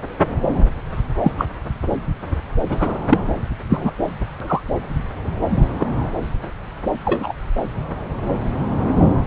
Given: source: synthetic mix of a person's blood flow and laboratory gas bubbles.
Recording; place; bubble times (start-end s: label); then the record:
Doppler ultrasound of blood flow; subclavian vein
1.20-1.32 s: bubbles
1.38-1.46 s: bubbles
2.69-2.98 s: bubbles
3.09-3.19 s: bubbles
3.69-3.91 s: bubbles
4.40-4.62 s: bubbles
5.79-5.87 s: bubbles
7.05-7.33 s: bubbles
From the record:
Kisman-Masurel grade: 123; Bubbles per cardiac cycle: 1 to 2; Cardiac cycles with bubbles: 10 to 50%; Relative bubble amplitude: loud (0.450 to 0.775); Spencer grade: 2 (many but less than half of the cardiac periods contain bubble signals, singularly or in groups); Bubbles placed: anywhere in the cardiac cycle